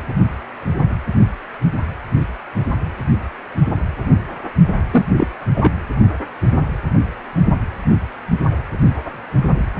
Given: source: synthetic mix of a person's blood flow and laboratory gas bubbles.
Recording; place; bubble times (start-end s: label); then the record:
Doppler ultrasound of blood flow; precordium
4.91-5.05 s: bubbles
5.17-5.27 s: bubbles
5.54-5.71 s: bubbles
From the record:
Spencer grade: 1 (occasional bubble signal discernible with the cardiac motion signal, with majority of cardiac periods free of bubbles); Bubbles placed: only in the low amplitude regions of the cardiac cycle